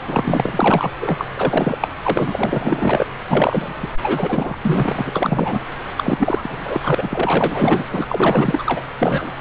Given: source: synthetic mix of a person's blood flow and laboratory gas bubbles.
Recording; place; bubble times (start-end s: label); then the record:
Doppler ultrasound of blood flow; subclavian vein
0.07-0.90 s: bubbles
1.01-1.25 s: bubbles
1.36-1.88 s: bubbles
2.04-3.06 s: bubbles
3.29-3.74 s: bubbles
3.82-3.89 s: bubbles
4.02-4.54 s: bubbles
4.62-5.61 s: bubbles
5.97-6.80 s: bubbles
6.82-7.85 s: bubbles
7.90-8.82 s: bubbles
8.98-9.33 s: bubbles
From the record:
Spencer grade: 4 (maximum detectable bubble signal sounding continuously throughout systole and diastole of every cardiac period, and overriding the amplitude of the normal cardiac signals); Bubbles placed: anywhere in the cardiac cycle